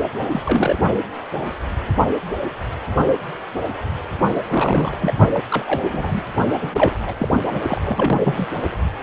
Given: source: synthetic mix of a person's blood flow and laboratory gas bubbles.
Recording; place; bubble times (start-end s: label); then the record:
Doppler ultrasound of blood flow; precordium
0.19-0.24 s: bubbles
0.31-0.43 s: bubbles
0.45-0.77 s: bubbles
4.35-4.42 s: bubbles
4.48-5.13 s: bubbles
5.33-5.42 s: bubbles
5.50-6.25 s: bubbles
6.61-6.97 s: bubbles
7.02-7.17 s: bubbles
7.19-7.42 s: bubbles
7.54-7.60 s: bubbles
7.67-7.81 s: bubbles
7.83-8.46 s: bubbles
From the record:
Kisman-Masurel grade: 332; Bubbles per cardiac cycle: rolling drumbeat, 9 or more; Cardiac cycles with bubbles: 50 to 99%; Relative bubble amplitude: moderate (0.250 to 0.450); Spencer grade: 3 (all of the cardiac periods contain showers or single bubble signals, but not dominating or overriding the cardiac motion signals); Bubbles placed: only in the low amplitude regions of the cardiac cycle